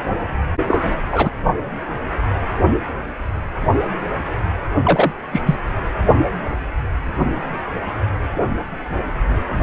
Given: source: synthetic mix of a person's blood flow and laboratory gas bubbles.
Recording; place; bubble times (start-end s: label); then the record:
Doppler ultrasound of blood flow; precordium
0.68-1.30 s: bubbles
4.83-5.12 s: bubbles
5.33-5.42 s: bubbles
5.46-5.55 s: bubbles
From the record:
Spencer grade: 2 (many but less than half of the cardiac periods contain bubble signals, singularly or in groups); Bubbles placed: only in the low amplitude regions of the cardiac cycle